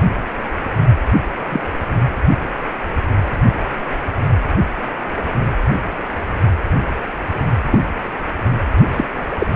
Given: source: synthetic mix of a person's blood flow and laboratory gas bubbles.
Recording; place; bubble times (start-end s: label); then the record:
Doppler ultrasound of blood flow; precordium
1.49-1.60 s: bubbles
7.71-7.78 s: bubbles
8.93-9.04 s: bubbles
9.40-9.46 s: bubbles
From the record:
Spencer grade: 2 (many but less than half of the cardiac periods contain bubble signals, singularly or in groups); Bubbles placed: anywhere in the cardiac cycle